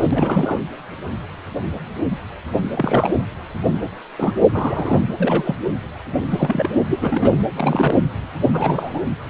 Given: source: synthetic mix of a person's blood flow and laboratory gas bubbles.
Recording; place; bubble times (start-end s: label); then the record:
Doppler ultrasound of blood flow; precordium
0.00-0.07 s: bubbles
0.11-0.59 s: bubbles
2.74-3.12 s: bubbles
4.18-4.34 s: bubbles
4.52-5.05 s: bubbles
5.08-5.56 s: bubbles
6.30-6.71 s: bubbles
6.89-7.36 s: bubbles
7.55-7.95 s: bubbles
8.53-9.03 s: bubbles
From the record:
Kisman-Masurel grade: 222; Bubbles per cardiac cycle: several, 3 to 8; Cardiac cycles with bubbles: 10 to 50%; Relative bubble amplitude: moderate (0.250 to 0.450); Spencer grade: 2 (many but less than half of the cardiac periods contain bubble signals, singularly or in groups); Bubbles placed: anywhere in the cardiac cycle